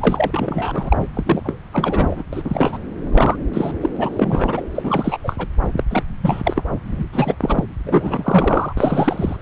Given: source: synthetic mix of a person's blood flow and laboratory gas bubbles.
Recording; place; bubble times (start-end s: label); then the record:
Doppler ultrasound of blood flow; subclavian vein
0.00-0.96 s: bubbles
0.99-1.05 s: bubbles
1.14-1.59 s: bubbles
1.72-2.23 s: bubbles
2.33-2.42 s: bubbles
2.44-2.79 s: bubbles
3.12-3.37 s: bubbles
3.53-3.74 s: bubbles
3.81-3.90 s: bubbles
3.95-4.66 s: bubbles
4.75-5.17 s: bubbles
5.24-5.48 s: bubbles
5.77-5.83 s: bubbles
5.91-6.04 s: bubbles
6.22-6.62 s: bubbles
6.84-7.05 s: bubbles
7.12-7.35 s: bubbles
7.41-7.65 s: bubbles
7.86-8.73 s: bubbles
8.77-9.36 s: bubbles
From the record:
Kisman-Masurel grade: 342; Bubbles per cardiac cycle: rolling drumbeat, 9 or more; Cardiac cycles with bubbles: 100%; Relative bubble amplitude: moderate (0.250 to 0.450); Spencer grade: 3 (all of the cardiac periods contain showers or single bubble signals, but not dominating or overriding the cardiac motion signals); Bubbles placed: anywhere in the cardiac cycle